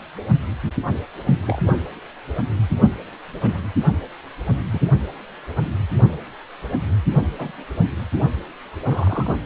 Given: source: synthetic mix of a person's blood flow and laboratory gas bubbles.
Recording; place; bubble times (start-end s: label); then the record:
Doppler ultrasound of blood flow; precordium
1.47-1.62 s: bubbles
1.66-1.77 s: bubbles
3.41-3.62 s: bubbles
4.71-4.79 s: bubbles
7.38-7.51 s: bubbles
8.85-9.35 s: bubbles
From the record:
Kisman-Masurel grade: 121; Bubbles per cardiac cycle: 1 to 2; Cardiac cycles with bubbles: 10 to 50%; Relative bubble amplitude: barely perceptible (0.100 to 0.250); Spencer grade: 2 (many but less than half of the cardiac periods contain bubble signals, singularly or in groups); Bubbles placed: only in the low amplitude regions of the cardiac cycle